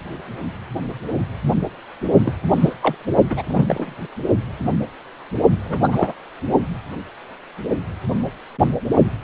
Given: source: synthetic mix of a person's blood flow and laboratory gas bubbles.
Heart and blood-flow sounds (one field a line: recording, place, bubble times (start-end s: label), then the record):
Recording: Doppler ultrasound of blood flow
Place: precordium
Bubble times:
2.24-2.35 s: bubbles
2.53-2.73 s: bubbles
2.82-2.95 s: bubbles
3.30-3.43 s: bubbles
3.47-3.95 s: bubbles
5.65-6.13 s: bubbles
From the record:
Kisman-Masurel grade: 222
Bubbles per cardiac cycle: several, 3 to 8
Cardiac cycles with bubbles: 10 to 50%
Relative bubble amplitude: moderate (0.250 to 0.450)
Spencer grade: 2 (many but less than half of the cardiac periods contain bubble signals, singularly or in groups)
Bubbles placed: only in the low amplitude regions of the cardiac cycle